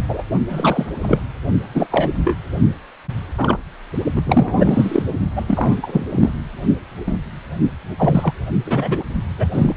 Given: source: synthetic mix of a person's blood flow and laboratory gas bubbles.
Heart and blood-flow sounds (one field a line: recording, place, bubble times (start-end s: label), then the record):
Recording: Doppler ultrasound of blood flow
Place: precordium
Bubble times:
0.08-0.24 s: bubbles
0.48-0.92 s: bubbles
0.98-1.23 s: bubbles
1.74-1.86 s: bubbles
1.90-2.13 s: bubbles
2.18-2.35 s: bubbles
3.38-3.60 s: bubbles
4.16-4.22 s: bubbles
4.27-5.03 s: bubbles
5.36-5.76 s: bubbles
5.83-6.05 s: bubbles
6.10-6.34 s: bubbles
7.07-7.16 s: bubbles
7.98-8.34 s: bubbles
8.66-9.04 s: bubbles
9.38-9.46 s: bubbles
9.52-9.75 s: bubbles
From the record:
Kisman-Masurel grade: 243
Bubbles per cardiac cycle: several, 3 to 8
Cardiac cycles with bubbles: 100%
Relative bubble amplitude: loud (0.450 to 0.775)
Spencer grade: 3 (all of the cardiac periods contain showers or single bubble signals, but not dominating or overriding the cardiac motion signals)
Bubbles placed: only in the low amplitude regions of the cardiac cycle